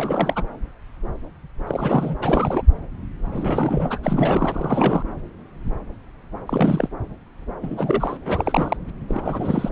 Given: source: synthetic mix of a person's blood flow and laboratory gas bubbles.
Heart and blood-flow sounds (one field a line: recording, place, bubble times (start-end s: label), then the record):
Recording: Doppler ultrasound of blood flow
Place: subclavian vein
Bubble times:
0.00-0.43 s: bubbles
1.67-2.16 s: bubbles
2.21-2.62 s: bubbles
3.33-3.99 s: bubbles
4.03-5.02 s: bubbles
6.46-6.88 s: bubbles
7.62-8.17 s: bubbles
8.24-8.77 s: bubbles
9.08-9.72 s: bubbles
From the record:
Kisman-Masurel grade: 332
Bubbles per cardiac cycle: rolling drumbeat, 9 or more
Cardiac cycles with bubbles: 50 to 99%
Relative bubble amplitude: moderate (0.250 to 0.450)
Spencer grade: 3 (all of the cardiac periods contain showers or single bubble signals, but not dominating or overriding the cardiac motion signals)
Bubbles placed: anywhere in the cardiac cycle